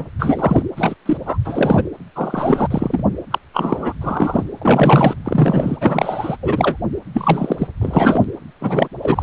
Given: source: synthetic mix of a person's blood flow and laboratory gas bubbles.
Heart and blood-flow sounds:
Doppler ultrasound of blood flow; precordium
0.00-0.06 s: bubbles
0.19-0.62 s: bubbles
0.77-0.95 s: bubbles
1.05-1.17 s: bubbles
1.26-1.38 s: bubbles
1.45-1.83 s: bubbles
2.15-2.67 s: bubbles
2.71-3.03 s: bubbles
3.31-3.39 s: bubbles
3.53-3.94 s: bubbles
4.01-4.44 s: bubbles
4.62-5.15 s: bubbles
5.24-5.78 s: bubbles
5.80-6.37 s: bubbles
6.42-6.77 s: bubbles
7.13-7.67 s: bubbles
7.81-8.24 s: bubbles
8.61-8.88 s: bubbles
9.02-9.23 s: bubbles
From the record:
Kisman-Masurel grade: 243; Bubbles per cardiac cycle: several, 3 to 8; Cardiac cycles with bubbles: 100%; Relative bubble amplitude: loud (0.450 to 0.775); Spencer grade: 3 (all of the cardiac periods contain showers or single bubble signals, but not dominating or overriding the cardiac motion signals); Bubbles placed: anywhere in the cardiac cycle

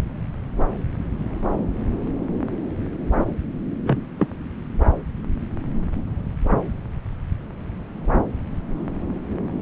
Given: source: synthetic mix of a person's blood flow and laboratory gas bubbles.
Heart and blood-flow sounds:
Doppler ultrasound of blood flow; subclavian vein
3.84-3.98 s: bubbles
4.19-4.27 s: bubbles
From the record:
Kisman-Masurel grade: 112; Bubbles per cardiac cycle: 1 to 2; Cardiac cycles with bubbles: 1 to 10%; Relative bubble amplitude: moderate (0.250 to 0.450); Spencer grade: 1 (occasional bubble signal discernible with the cardiac motion signal, with majority of cardiac periods free of bubbles); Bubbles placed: anywhere in the cardiac cycle

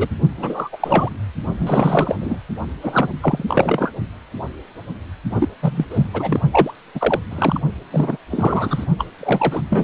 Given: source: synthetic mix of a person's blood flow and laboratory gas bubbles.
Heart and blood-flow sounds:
Doppler ultrasound of blood flow; precordium
0.00-0.09 s: bubbles
0.37-0.69 s: bubbles
0.72-0.77 s: bubbles
0.80-1.09 s: bubbles
1.59-2.17 s: bubbles
2.21-2.38 s: bubbles
2.82-3.10 s: bubbles
3.21-3.45 s: bubbles
3.48-3.92 s: bubbles
5.32-5.49 s: bubbles
5.62-5.86 s: bubbles
5.90-6.08 s: bubbles
6.13-6.41 s: bubbles
6.51-6.73 s: bubbles
6.95-7.19 s: bubbles
7.31-7.59 s: bubbles
7.92-8.17 s: bubbles
8.30-8.85 s: bubbles
8.98-9.05 s: bubbles
9.19-9.61 s: bubbles
9.69-9.84 s: bubbles
From the record:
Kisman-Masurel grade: 333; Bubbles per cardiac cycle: rolling drumbeat, 9 or more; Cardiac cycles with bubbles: 50 to 99%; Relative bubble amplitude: loud (0.450 to 0.775); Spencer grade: 3 (all of the cardiac periods contain showers or single bubble signals, but not dominating or overriding the cardiac motion signals); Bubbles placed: only in the low amplitude regions of the cardiac cycle

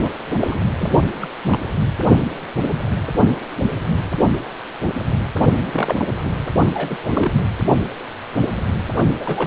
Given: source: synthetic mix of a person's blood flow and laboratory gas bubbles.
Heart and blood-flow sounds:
Doppler ultrasound of blood flow; precordium
0.02-0.11 s: bubbles
0.38-1.00 s: bubbles
1.22-1.28 s: bubbles
1.44-1.59 s: bubbles
5.73-6.05 s: bubbles
6.23-6.31 s: bubbles
6.74-6.96 s: bubbles
7.03-7.42 s: bubbles
9.19-9.47 s: bubbles
From the record:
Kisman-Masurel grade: 222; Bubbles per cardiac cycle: several, 3 to 8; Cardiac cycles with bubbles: 10 to 50%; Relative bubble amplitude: moderate (0.250 to 0.450); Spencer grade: 2 (many but less than half of the cardiac periods contain bubble signals, singularly or in groups); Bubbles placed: only in the low amplitude regions of the cardiac cycle

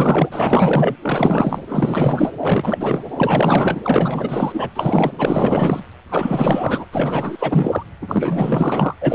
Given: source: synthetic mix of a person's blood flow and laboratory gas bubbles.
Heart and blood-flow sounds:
Doppler ultrasound of blood flow; precordium
0.00-0.95 s: bubbles
1.01-1.59 s: bubbles
1.68-2.32 s: bubbles
2.41-3.04 s: bubbles
3.16-3.81 s: bubbles
3.83-4.69 s: bubbles
4.75-5.12 s: bubbles
5.18-5.80 s: bubbles
6.09-6.86 s: bubbles
6.92-7.86 s: bubbles
8.01-8.95 s: bubbles
9.00-9.15 s: bubbles
From the record:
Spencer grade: 4 (maximum detectable bubble signal sounding continuously throughout systole and diastole of every cardiac period, and overriding the amplitude of the normal cardiac signals); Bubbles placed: anywhere in the cardiac cycle

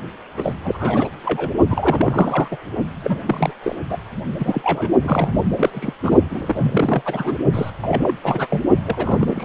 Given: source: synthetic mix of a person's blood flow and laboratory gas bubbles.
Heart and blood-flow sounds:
Doppler ultrasound of blood flow; precordium
0.36-0.56 s: bubbles
0.64-1.09 s: bubbles
1.24-1.50 s: bubbles
1.69-2.48 s: bubbles
2.51-2.56 s: bubbles
3.02-3.23 s: bubbles
3.26-3.52 s: bubbles
3.62-3.75 s: bubbles
3.89-3.97 s: bubbles
4.39-4.92 s: bubbles
5.04-5.44 s: bubbles
5.55-5.93 s: bubbles
6.02-6.17 s: bubbles
6.30-7.02 s: bubbles
7.05-7.38 s: bubbles
7.54-7.70 s: bubbles
7.82-8.18 s: bubbles
8.23-8.48 s: bubbles
8.50-8.65 s: bubbles
8.86-9.45 s: bubbles
From the record:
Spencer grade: 3 (all of the cardiac periods contain showers or single bubble signals, but not dominating or overriding the cardiac motion signals); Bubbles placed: only in the low amplitude regions of the cardiac cycle

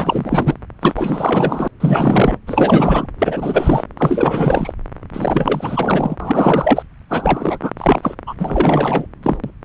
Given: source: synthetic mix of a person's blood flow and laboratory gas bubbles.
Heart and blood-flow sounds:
Doppler ultrasound of blood flow; subclavian vein
0.00-0.54 s: bubbles
0.81-1.68 s: bubbles
1.80-2.38 s: bubbles
2.46-3.07 s: bubbles
3.19-3.84 s: bubbles
3.97-4.73 s: bubbles
5.13-6.16 s: bubbles
6.19-6.83 s: bubbles
7.09-7.58 s: bubbles
7.62-7.71 s: bubbles
7.78-8.15 s: bubbles
8.27-8.35 s: bubbles
8.39-9.06 s: bubbles
9.23-9.37 s: bubbles
9.44-9.51 s: bubbles
From the record:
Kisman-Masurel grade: 444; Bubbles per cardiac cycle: continuous sound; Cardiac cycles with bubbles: 100%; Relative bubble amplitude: maximal (0.775 to 0.999); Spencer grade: 4 (maximum detectable bubble signal sounding continuously throughout systole and diastole of every cardiac period, and overriding the amplitude of the normal cardiac signals); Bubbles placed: anywhere in the cardiac cycle

